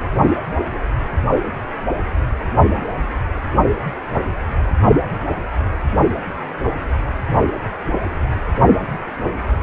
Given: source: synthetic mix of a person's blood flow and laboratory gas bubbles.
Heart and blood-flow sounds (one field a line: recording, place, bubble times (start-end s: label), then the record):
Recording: Doppler ultrasound of blood flow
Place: precordium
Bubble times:
0.72-0.78 s: bubbles
From the record:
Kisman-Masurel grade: 111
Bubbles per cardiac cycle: 1 to 2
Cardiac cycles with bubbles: 1 to 10%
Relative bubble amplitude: barely perceptible (0.100 to 0.250)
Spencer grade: 1 (occasional bubble signal discernible with the cardiac motion signal, with majority of cardiac periods free of bubbles)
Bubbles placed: only in the low amplitude regions of the cardiac cycle